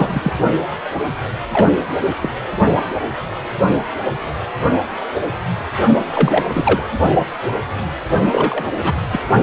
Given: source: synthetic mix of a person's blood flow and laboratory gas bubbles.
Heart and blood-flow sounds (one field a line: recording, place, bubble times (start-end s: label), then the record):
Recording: Doppler ultrasound of blood flow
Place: precordium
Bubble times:
0.00-0.32 s: bubbles
0.95-1.01 s: bubbles
1.40-1.74 s: bubbles
2.21-2.29 s: bubbles
6.13-6.45 s: bubbles
6.54-6.83 s: bubbles
8.32-9.02 s: bubbles
9.11-9.20 s: bubbles
From the record:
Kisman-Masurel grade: 233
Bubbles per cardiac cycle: several, 3 to 8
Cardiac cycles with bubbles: 50 to 99%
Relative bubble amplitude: loud (0.450 to 0.775)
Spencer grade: 3 (all of the cardiac periods contain showers or single bubble signals, but not dominating or overriding the cardiac motion signals)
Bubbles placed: only in the low amplitude regions of the cardiac cycle